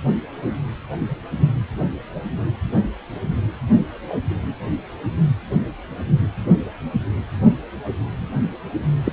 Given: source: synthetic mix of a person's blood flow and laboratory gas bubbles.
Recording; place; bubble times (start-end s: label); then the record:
Doppler ultrasound of blood flow; precordium
9.05-9.13 s: bubbles
From the record:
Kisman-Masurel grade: 213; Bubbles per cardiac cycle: several, 3 to 8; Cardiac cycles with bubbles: 1 to 10%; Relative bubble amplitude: loud (0.450 to 0.775); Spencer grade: 1 (occasional bubble signal discernible with the cardiac motion signal, with majority of cardiac periods free of bubbles); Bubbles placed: anywhere in the cardiac cycle